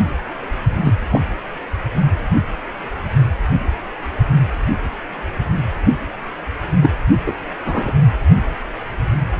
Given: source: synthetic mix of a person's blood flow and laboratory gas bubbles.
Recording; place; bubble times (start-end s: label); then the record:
Doppler ultrasound of blood flow; precordium
0.84-0.93 s: bubbles
1.10-1.21 s: bubbles
6.82-6.91 s: bubbles
7.26-7.33 s: bubbles
7.65-7.93 s: bubbles
From the record:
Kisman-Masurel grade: 122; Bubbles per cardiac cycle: 1 to 2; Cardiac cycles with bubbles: 10 to 50%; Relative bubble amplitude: moderate (0.250 to 0.450); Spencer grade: 2 (many but less than half of the cardiac periods contain bubble signals, singularly or in groups); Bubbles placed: only in the low amplitude regions of the cardiac cycle